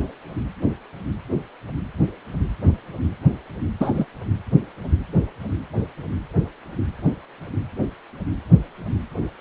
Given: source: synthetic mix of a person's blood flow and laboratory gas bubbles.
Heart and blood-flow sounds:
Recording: Doppler ultrasound of blood flow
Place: precordium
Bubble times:
3.80-4.05 s: bubbles
From the record:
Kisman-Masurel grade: 113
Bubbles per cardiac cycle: 1 to 2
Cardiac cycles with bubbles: 1 to 10%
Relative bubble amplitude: loud (0.450 to 0.775)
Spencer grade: 1 (occasional bubble signal discernible with the cardiac motion signal, with majority of cardiac periods free of bubbles)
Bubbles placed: anywhere in the cardiac cycle

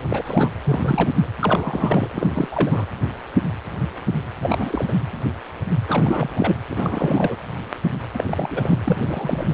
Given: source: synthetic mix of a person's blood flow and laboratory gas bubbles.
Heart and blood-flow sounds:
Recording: Doppler ultrasound of blood flow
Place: precordium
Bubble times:
0.09-0.51 s: bubbles
0.65-1.10 s: bubbles
1.15-1.28 s: bubbles
1.39-2.08 s: bubbles
2.14-2.48 s: bubbles
2.52-2.85 s: bubbles
4.40-4.92 s: bubbles
5.88-6.56 s: bubbles
6.69-7.36 s: bubbles
8.13-8.24 s: bubbles
8.27-8.78 s: bubbles
8.85-9.54 s: bubbles
From the record:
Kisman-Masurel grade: 332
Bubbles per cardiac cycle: rolling drumbeat, 9 or more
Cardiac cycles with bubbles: 50 to 99%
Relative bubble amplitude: moderate (0.250 to 0.450)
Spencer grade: 3 (all of the cardiac periods contain showers or single bubble signals, but not dominating or overriding the cardiac motion signals)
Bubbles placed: anywhere in the cardiac cycle

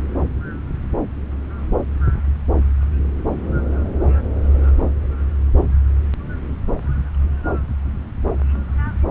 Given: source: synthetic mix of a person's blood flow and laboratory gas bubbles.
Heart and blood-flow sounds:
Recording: Doppler ultrasound of blood flow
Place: subclavian vein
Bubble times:
no bubbles
From the record:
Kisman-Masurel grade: 000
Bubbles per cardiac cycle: 0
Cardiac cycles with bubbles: 0%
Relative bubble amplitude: no bubbles discernible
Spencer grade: 0 (complete lack of bubble signals)

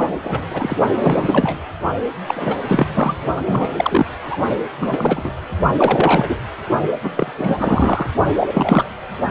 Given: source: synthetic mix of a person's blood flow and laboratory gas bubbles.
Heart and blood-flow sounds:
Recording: Doppler ultrasound of blood flow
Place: precordium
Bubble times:
0.00-0.11 s: bubbles
0.24-0.40 s: bubbles
0.51-0.76 s: bubbles
1.02-1.58 s: bubbles
2.27-2.56 s: bubbles
2.67-2.87 s: bubbles
2.94-3.17 s: bubbles
3.36-3.42 s: bubbles
3.46-4.06 s: bubbles
4.25-4.37 s: bubbles
4.80-5.32 s: bubbles
5.77-6.37 s: bubbles
7.03-7.09 s: bubbles
7.17-7.32 s: bubbles
7.38-8.11 s: bubbles
8.36-8.84 s: bubbles
From the record:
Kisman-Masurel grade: 343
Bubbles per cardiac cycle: rolling drumbeat, 9 or more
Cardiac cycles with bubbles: 100%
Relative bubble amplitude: loud (0.450 to 0.775)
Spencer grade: 3 (all of the cardiac periods contain showers or single bubble signals, but not dominating or overriding the cardiac motion signals)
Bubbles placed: only in the low amplitude regions of the cardiac cycle

